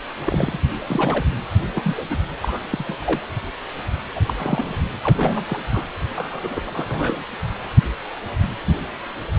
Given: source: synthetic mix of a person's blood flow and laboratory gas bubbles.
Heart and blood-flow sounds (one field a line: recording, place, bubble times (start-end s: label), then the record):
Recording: Doppler ultrasound of blood flow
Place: precordium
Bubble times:
0.26-0.63 s: bubbles
0.89-1.25 s: bubbles
1.76-2.02 s: bubbles
2.10-2.17 s: bubbles
2.42-2.58 s: bubbles
2.61-2.96 s: bubbles
3.00-3.19 s: bubbles
4.15-4.19 s: bubbles
4.27-4.33 s: bubbles
4.38-4.83 s: bubbles
5.03-5.58 s: bubbles
5.71-5.87 s: bubbles
6.15-6.61 s: bubbles
6.65-7.26 s: bubbles
From the record:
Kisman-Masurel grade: 232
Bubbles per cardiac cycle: several, 3 to 8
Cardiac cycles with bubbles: 50 to 99%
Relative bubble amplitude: moderate (0.250 to 0.450)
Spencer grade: 3 (all of the cardiac periods contain showers or single bubble signals, but not dominating or overriding the cardiac motion signals)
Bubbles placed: anywhere in the cardiac cycle